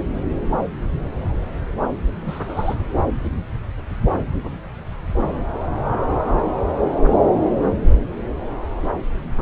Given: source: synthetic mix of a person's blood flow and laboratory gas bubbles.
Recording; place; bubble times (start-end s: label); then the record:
Doppler ultrasound of blood flow; subclavian vein
2.25-2.75 s: bubbles
From the record:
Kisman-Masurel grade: 112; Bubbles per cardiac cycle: 1 to 2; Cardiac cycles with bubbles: 1 to 10%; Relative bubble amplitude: moderate (0.250 to 0.450); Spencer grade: 1 (occasional bubble signal discernible with the cardiac motion signal, with majority of cardiac periods free of bubbles); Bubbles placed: anywhere in the cardiac cycle